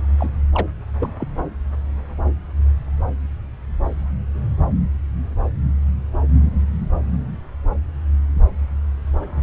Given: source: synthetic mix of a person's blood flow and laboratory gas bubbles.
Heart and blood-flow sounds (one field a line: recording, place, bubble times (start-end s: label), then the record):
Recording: Doppler ultrasound of blood flow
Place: subclavian vein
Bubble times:
0.18-0.29 s: bubbles
0.54-0.67 s: bubbles
1.00-1.14 s: bubbles
1.18-1.27 s: bubbles
From the record:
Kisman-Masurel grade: 211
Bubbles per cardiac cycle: several, 3 to 8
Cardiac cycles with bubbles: 1 to 10%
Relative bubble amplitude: barely perceptible (0.100 to 0.250)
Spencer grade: 1 (occasional bubble signal discernible with the cardiac motion signal, with majority of cardiac periods free of bubbles)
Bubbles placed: anywhere in the cardiac cycle